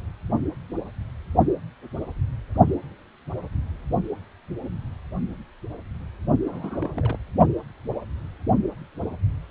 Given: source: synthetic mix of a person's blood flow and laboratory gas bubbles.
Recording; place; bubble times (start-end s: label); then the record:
Doppler ultrasound of blood flow; precordium
6.45-7.19 s: bubbles
From the record:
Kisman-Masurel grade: 211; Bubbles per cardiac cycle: several, 3 to 8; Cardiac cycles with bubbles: 1 to 10%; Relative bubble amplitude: barely perceptible (0.100 to 0.250); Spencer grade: 1 (occasional bubble signal discernible with the cardiac motion signal, with majority of cardiac periods free of bubbles); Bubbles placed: only in the low amplitude regions of the cardiac cycle